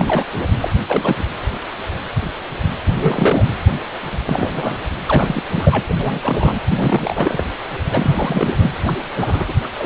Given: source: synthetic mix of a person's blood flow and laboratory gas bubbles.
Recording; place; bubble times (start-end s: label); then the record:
Doppler ultrasound of blood flow; precordium
0.00-0.27 s: bubbles
0.60-0.71 s: bubbles
0.88-1.16 s: bubbles
1.19-1.23 s: bubbles
2.90-3.46 s: bubbles
4.25-4.87 s: bubbles
5.06-5.43 s: bubbles
5.55-5.82 s: bubbles
5.88-5.95 s: bubbles
5.99-6.60 s: bubbles
6.68-7.44 s: bubbles
7.91-8.55 s: bubbles
8.59-8.71 s: bubbles
8.85-8.93 s: bubbles
9.16-9.53 s: bubbles
9.63-9.67 s: bubbles
9.79-9.85 s: bubbles
From the record:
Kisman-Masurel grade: 332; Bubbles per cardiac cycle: rolling drumbeat, 9 or more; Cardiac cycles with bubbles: 50 to 99%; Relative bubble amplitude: moderate (0.250 to 0.450); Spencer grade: 3 (all of the cardiac periods contain showers or single bubble signals, but not dominating or overriding the cardiac motion signals); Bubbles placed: anywhere in the cardiac cycle